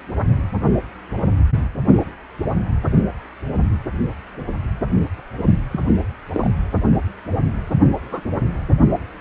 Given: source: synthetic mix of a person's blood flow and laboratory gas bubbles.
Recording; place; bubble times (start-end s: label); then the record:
Doppler ultrasound of blood flow; precordium
5.71-5.80 s: bubbles
6.33-6.50 s: bubbles
8.11-8.21 s: bubbles
From the record:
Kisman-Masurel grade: 122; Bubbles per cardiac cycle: 1 to 2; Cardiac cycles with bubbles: 10 to 50%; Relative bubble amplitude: moderate (0.250 to 0.450); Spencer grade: 2 (many but less than half of the cardiac periods contain bubble signals, singularly or in groups); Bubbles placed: only in the low amplitude regions of the cardiac cycle